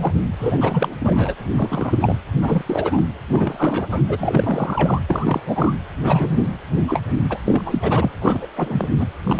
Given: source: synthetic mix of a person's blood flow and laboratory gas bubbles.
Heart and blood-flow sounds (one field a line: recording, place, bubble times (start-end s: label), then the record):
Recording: Doppler ultrasound of blood flow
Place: precordium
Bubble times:
0.00-0.13 s: bubbles
0.39-0.96 s: bubbles
1.00-1.34 s: bubbles
1.40-1.45 s: bubbles
1.58-2.15 s: bubbles
2.42-2.62 s: bubbles
2.66-3.02 s: bubbles
3.29-4.02 s: bubbles
4.08-5.01 s: bubbles
5.08-5.42 s: bubbles
5.47-5.73 s: bubbles
6.03-6.58 s: bubbles
6.88-7.01 s: bubbles
7.29-7.38 s: bubbles
7.46-7.62 s: bubbles
7.65-7.79 s: bubbles
7.82-8.11 s: bubbles
8.21-8.47 s: bubbles
8.55-8.87 s: bubbles
8.99-9.06 s: bubbles
9.23-9.40 s: bubbles
From the record:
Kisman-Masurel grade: 342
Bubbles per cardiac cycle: rolling drumbeat, 9 or more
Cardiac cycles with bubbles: 100%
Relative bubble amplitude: moderate (0.250 to 0.450)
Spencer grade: 3 (all of the cardiac periods contain showers or single bubble signals, but not dominating or overriding the cardiac motion signals)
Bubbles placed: anywhere in the cardiac cycle